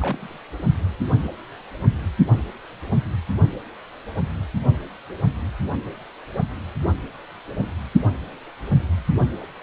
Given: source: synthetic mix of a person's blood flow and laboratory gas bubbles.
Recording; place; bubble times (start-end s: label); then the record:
Doppler ultrasound of blood flow; precordium
0.00-0.38 s: bubbles
From the record:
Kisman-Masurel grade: 121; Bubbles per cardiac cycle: 1 to 2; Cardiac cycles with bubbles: 10 to 50%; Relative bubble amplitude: barely perceptible (0.100 to 0.250); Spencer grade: 2 (many but less than half of the cardiac periods contain bubble signals, singularly or in groups); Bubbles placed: only in the low amplitude regions of the cardiac cycle